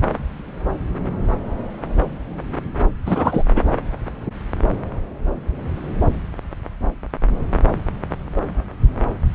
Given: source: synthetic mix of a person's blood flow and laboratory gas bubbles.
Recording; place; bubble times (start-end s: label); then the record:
Doppler ultrasound of blood flow; subclavian vein
3.06-3.43 s: bubbles
3.56-3.63 s: bubbles
From the record:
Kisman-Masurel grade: 213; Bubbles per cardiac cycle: several, 3 to 8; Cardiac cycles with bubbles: 1 to 10%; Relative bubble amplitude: loud (0.450 to 0.775); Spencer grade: 1 (occasional bubble signal discernible with the cardiac motion signal, with majority of cardiac periods free of bubbles); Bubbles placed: anywhere in the cardiac cycle